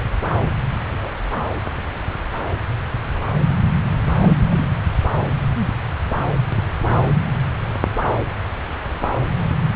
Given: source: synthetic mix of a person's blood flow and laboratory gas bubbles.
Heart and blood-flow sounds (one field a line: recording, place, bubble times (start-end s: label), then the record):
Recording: Doppler ultrasound of blood flow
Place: subclavian vein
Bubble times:
0.91-1.09 s: bubbles
4.22-4.35 s: bubbles
4.50-4.67 s: bubbles
From the record:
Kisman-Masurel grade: 112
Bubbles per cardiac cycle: 1 to 2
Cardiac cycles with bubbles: 1 to 10%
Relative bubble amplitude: moderate (0.250 to 0.450)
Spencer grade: 1 (occasional bubble signal discernible with the cardiac motion signal, with majority of cardiac periods free of bubbles)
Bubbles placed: anywhere in the cardiac cycle